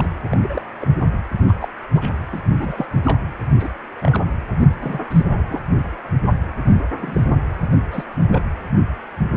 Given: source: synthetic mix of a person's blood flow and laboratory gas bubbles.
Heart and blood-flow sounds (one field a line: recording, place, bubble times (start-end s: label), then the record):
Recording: Doppler ultrasound of blood flow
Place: precordium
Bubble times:
0.00-0.07 s: bubbles
0.30-0.61 s: bubbles
0.81-0.86 s: bubbles
1.48-1.53 s: bubbles
1.60-1.69 s: bubbles
1.95-2.09 s: bubbles
2.32-2.41 s: bubbles
2.55-2.86 s: bubbles
3.04-3.19 s: bubbles
3.59-3.67 s: bubbles
4.02-4.23 s: bubbles
4.61-4.67 s: bubbles
4.82-5.00 s: bubbles
5.09-5.24 s: bubbles
5.49-5.61 s: bubbles
6.66-6.83 s: bubbles
6.99-7.21 s: bubbles
7.92-8.04 s: bubbles
8.29-8.42 s: bubbles
From the record:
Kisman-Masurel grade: 232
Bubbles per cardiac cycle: several, 3 to 8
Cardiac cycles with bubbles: 50 to 99%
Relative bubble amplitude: moderate (0.250 to 0.450)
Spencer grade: 3 (all of the cardiac periods contain showers or single bubble signals, but not dominating or overriding the cardiac motion signals)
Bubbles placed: anywhere in the cardiac cycle